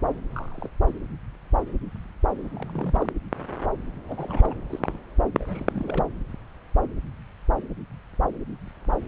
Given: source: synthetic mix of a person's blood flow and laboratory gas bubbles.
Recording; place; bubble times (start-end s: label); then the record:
Doppler ultrasound of blood flow; subclavian vein
0.32-0.69 s: bubbles
2.54-3.07 s: bubbles
4.08-4.58 s: bubbles
4.69-5.02 s: bubbles
5.39-6.04 s: bubbles
From the record:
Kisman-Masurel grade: 221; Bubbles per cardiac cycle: several, 3 to 8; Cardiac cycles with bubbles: 10 to 50%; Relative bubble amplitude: barely perceptible (0.100 to 0.250); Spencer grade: 2 (many but less than half of the cardiac periods contain bubble signals, singularly or in groups); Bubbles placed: anywhere in the cardiac cycle